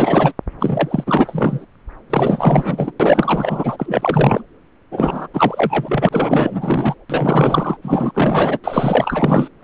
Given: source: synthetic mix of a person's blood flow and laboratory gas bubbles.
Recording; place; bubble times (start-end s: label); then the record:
Doppler ultrasound of blood flow; subclavian vein
0.00-0.33 s: bubbles
0.59-1.03 s: bubbles
1.06-1.65 s: bubbles
2.10-2.92 s: bubbles
3.00-4.43 s: bubbles
4.91-5.28 s: bubbles
5.33-6.95 s: bubbles
7.10-7.78 s: bubbles
7.82-8.59 s: bubbles
8.63-9.48 s: bubbles
9.61-9.64 s: bubbles
From the record:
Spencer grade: 4 (maximum detectable bubble signal sounding continuously throughout systole and diastole of every cardiac period, and overriding the amplitude of the normal cardiac signals); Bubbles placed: anywhere in the cardiac cycle